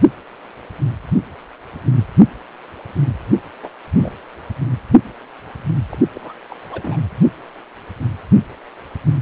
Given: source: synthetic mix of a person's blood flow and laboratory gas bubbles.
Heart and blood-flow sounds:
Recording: Doppler ultrasound of blood flow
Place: precordium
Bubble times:
3.28-3.40 s: bubbles
3.62-3.70 s: bubbles
3.97-4.12 s: bubbles
5.91-5.96 s: bubbles
6.14-6.33 s: bubbles
6.50-6.58 s: bubbles
6.69-6.99 s: bubbles
From the record:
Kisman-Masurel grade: 221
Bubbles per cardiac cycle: several, 3 to 8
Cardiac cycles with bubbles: 10 to 50%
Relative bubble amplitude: barely perceptible (0.100 to 0.250)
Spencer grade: 2 (many but less than half of the cardiac periods contain bubble signals, singularly or in groups)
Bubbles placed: anywhere in the cardiac cycle

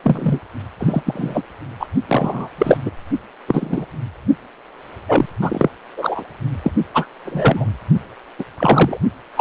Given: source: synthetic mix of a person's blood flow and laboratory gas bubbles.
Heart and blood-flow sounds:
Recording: Doppler ultrasound of blood flow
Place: precordium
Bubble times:
0.03-0.39 s: bubbles
0.79-1.02 s: bubbles
1.05-1.43 s: bubbles
1.80-1.88 s: bubbles
2.08-2.48 s: bubbles
2.58-2.78 s: bubbles
2.85-2.91 s: bubbles
3.47-3.85 s: bubbles
5.08-5.25 s: bubbles
5.40-5.69 s: bubbles
5.96-6.23 s: bubbles
6.63-6.72 s: bubbles
6.93-7.06 s: bubbles
7.25-7.65 s: bubbles
8.39-8.45 s: bubbles
8.57-8.97 s: bubbles
9.36-9.41 s: bubbles
From the record:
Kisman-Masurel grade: 233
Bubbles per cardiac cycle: several, 3 to 8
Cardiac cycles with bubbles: 50 to 99%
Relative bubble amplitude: loud (0.450 to 0.775)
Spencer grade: 3 (all of the cardiac periods contain showers or single bubble signals, but not dominating or overriding the cardiac motion signals)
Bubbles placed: only in the low amplitude regions of the cardiac cycle

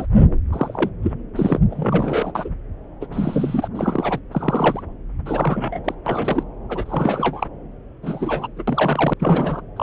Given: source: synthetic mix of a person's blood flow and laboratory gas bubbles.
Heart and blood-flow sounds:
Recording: Doppler ultrasound of blood flow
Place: subclavian vein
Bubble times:
0.00-0.07 s: bubbles
0.52-0.90 s: bubbles
1.02-1.12 s: bubbles
1.35-1.59 s: bubbles
1.71-2.32 s: bubbles
2.35-2.50 s: bubbles
3.00-3.06 s: bubbles
3.12-3.68 s: bubbles
3.75-4.20 s: bubbles
4.32-4.83 s: bubbles
5.25-5.80 s: bubbles
5.84-5.95 s: bubbles
6.06-6.43 s: bubbles
6.69-7.48 s: bubbles
8.02-8.47 s: bubbles
8.56-8.63 s: bubbles
8.67-9.13 s: bubbles
9.19-9.61 s: bubbles
9.76-9.83 s: bubbles
From the record:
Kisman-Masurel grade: 242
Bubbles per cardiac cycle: several, 3 to 8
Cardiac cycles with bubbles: 100%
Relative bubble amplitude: moderate (0.250 to 0.450)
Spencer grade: 3 (all of the cardiac periods contain showers or single bubble signals, but not dominating or overriding the cardiac motion signals)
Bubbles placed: anywhere in the cardiac cycle

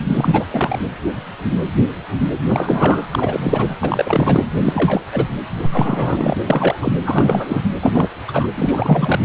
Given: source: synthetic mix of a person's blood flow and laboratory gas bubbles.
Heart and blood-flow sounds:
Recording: Doppler ultrasound of blood flow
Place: precordium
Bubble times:
0.00-0.04 s: bubbles
0.08-0.46 s: bubbles
0.51-0.79 s: bubbles
2.48-3.06 s: bubbles
3.11-3.77 s: bubbles
3.82-4.44 s: bubbles
4.58-5.04 s: bubbles
5.12-5.29 s: bubbles
5.62-6.34 s: bubbles
6.46-6.92 s: bubbles
7.05-7.62 s: bubbles
7.81-8.08 s: bubbles
8.28-8.48 s: bubbles
8.56-9.20 s: bubbles
From the record:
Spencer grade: 3 (all of the cardiac periods contain showers or single bubble signals, but not dominating or overriding the cardiac motion signals)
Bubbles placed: anywhere in the cardiac cycle

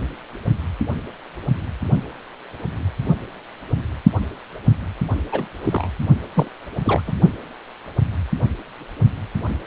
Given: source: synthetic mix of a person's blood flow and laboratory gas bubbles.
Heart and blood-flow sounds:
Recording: Doppler ultrasound of blood flow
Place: precordium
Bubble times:
5.32-5.47 s: bubbles
5.64-5.87 s: bubbles
6.36-6.48 s: bubbles
6.84-7.02 s: bubbles
7.07-7.13 s: bubbles
From the record:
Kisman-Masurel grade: 222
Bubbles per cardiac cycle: several, 3 to 8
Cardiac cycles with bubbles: 10 to 50%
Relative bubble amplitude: moderate (0.250 to 0.450)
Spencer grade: 2 (many but less than half of the cardiac periods contain bubble signals, singularly or in groups)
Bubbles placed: only in the low amplitude regions of the cardiac cycle

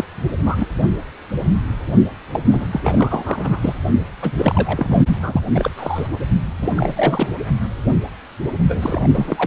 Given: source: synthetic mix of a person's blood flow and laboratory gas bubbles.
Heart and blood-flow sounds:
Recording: Doppler ultrasound of blood flow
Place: precordium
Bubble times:
0.00-0.04 s: bubbles
0.45-0.68 s: bubbles
2.33-2.45 s: bubbles
2.52-2.68 s: bubbles
2.71-3.75 s: bubbles
4.21-4.32 s: bubbles
4.38-5.05 s: bubbles
5.22-5.40 s: bubbles
5.54-5.71 s: bubbles
5.77-6.08 s: bubbles
6.60-6.72 s: bubbles
6.75-7.26 s: bubbles
8.69-9.47 s: bubbles
From the record:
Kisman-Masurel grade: 332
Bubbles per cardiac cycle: rolling drumbeat, 9 or more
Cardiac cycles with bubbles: 50 to 99%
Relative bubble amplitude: moderate (0.250 to 0.450)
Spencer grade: 3 (all of the cardiac periods contain showers or single bubble signals, but not dominating or overriding the cardiac motion signals)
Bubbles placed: only in the low amplitude regions of the cardiac cycle

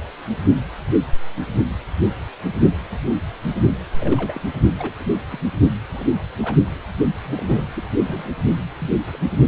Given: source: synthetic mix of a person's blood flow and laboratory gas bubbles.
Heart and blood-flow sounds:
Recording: Doppler ultrasound of blood flow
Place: precordium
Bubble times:
4.00-4.42 s: bubbles
4.54-4.62 s: bubbles
4.78-4.94 s: bubbles
5.00-5.16 s: bubbles
5.29-5.40 s: bubbles
5.90-6.05 s: bubbles
6.42-6.58 s: bubbles
7.25-7.70 s: bubbles
7.74-7.84 s: bubbles
8.06-8.31 s: bubbles
8.80-8.89 s: bubbles
9.12-9.18 s: bubbles
From the record:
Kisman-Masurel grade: 221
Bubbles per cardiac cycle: several, 3 to 8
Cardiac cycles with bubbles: 10 to 50%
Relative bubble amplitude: barely perceptible (0.100 to 0.250)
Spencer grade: 2 (many but less than half of the cardiac periods contain bubble signals, singularly or in groups)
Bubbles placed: only in the low amplitude regions of the cardiac cycle

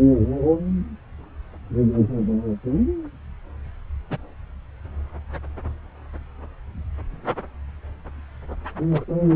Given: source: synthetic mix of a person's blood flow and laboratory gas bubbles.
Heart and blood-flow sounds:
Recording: Doppler ultrasound of blood flow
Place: subclavian vein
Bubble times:
4.10-4.18 s: bubbles
8.91-9.04 s: bubbles
From the record:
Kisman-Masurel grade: 121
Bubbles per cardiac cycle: 1 to 2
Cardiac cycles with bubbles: 10 to 50%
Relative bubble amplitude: barely perceptible (0.100 to 0.250)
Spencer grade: 2 (many but less than half of the cardiac periods contain bubble signals, singularly or in groups)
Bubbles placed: anywhere in the cardiac cycle

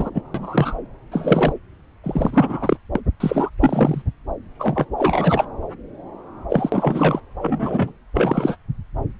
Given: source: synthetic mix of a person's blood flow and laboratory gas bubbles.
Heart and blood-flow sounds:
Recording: Doppler ultrasound of blood flow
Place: subclavian vein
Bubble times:
0.00-0.10 s: bubbles
0.14-0.21 s: bubbles
0.34-0.77 s: bubbles
1.11-1.53 s: bubbles
2.04-2.77 s: bubbles
2.95-3.00 s: bubbles
3.20-3.50 s: bubbles
3.60-4.02 s: bubbles
4.59-4.86 s: bubbles
4.98-5.44 s: bubbles
6.49-7.20 s: bubbles
7.41-7.92 s: bubbles
8.15-8.56 s: bubbles
From the record:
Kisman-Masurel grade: 242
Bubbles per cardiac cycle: several, 3 to 8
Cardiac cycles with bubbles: 100%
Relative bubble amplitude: moderate (0.250 to 0.450)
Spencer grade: 3 (all of the cardiac periods contain showers or single bubble signals, but not dominating or overriding the cardiac motion signals)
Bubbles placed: anywhere in the cardiac cycle

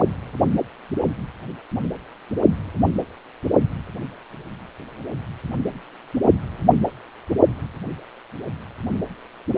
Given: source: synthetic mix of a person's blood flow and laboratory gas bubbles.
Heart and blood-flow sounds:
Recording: Doppler ultrasound of blood flow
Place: precordium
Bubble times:
0.00-0.04 s: bubbles
From the record:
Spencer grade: 2 (many but less than half of the cardiac periods contain bubble signals, singularly or in groups)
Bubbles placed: anywhere in the cardiac cycle

